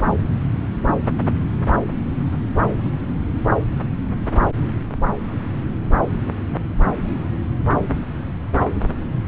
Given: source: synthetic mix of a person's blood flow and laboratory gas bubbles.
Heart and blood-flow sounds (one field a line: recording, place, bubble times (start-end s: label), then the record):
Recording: Doppler ultrasound of blood flow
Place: subclavian vein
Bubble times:
no bubbles
From the record:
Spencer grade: 0 (complete lack of bubble signals)